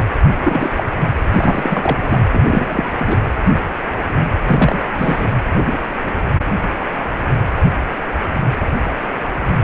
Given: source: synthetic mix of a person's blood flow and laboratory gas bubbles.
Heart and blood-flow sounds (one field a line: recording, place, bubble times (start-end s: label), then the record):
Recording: Doppler ultrasound of blood flow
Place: precordium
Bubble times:
0.44-0.83 s: bubbles
1.31-1.98 s: bubbles
2.03-2.20 s: bubbles
2.31-2.91 s: bubbles
2.96-3.17 s: bubbles
4.46-4.82 s: bubbles
4.98-5.33 s: bubbles
From the record:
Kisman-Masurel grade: 222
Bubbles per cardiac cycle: several, 3 to 8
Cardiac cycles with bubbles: 10 to 50%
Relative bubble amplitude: moderate (0.250 to 0.450)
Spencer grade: 2 (many but less than half of the cardiac periods contain bubble signals, singularly or in groups)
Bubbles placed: anywhere in the cardiac cycle